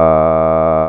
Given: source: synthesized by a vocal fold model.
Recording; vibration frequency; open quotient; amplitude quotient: sustained vowel; 80 Hz; 0.3; 1.3